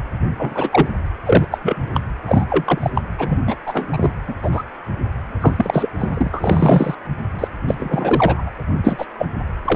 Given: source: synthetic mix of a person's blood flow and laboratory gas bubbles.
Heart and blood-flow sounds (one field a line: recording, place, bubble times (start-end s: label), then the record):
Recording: Doppler ultrasound of blood flow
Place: precordium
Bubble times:
0.38-0.88 s: bubbles
1.25-1.46 s: bubbles
1.51-1.58 s: bubbles
1.61-1.77 s: bubbles
1.94-2.00 s: bubbles
2.25-2.46 s: bubbles
2.49-2.90 s: bubbles
2.94-3.01 s: bubbles
3.18-3.36 s: bubbles
3.46-3.55 s: bubbles
3.65-3.90 s: bubbles
3.93-4.12 s: bubbles
4.27-4.35 s: bubbles
4.42-4.62 s: bubbles
5.41-5.90 s: bubbles
6.00-6.29 s: bubbles
6.32-6.95 s: bubbles
7.39-7.48 s: bubbles
7.68-7.75 s: bubbles
7.79-8.51 s: bubbles
8.83-9.05 s: bubbles
9.18-9.26 s: bubbles
9.64-9.76 s: bubbles
From the record:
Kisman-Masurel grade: 243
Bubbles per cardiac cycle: several, 3 to 8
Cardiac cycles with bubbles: 100%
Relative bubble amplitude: loud (0.450 to 0.775)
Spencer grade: 3 (all of the cardiac periods contain showers or single bubble signals, but not dominating or overriding the cardiac motion signals)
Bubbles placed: anywhere in the cardiac cycle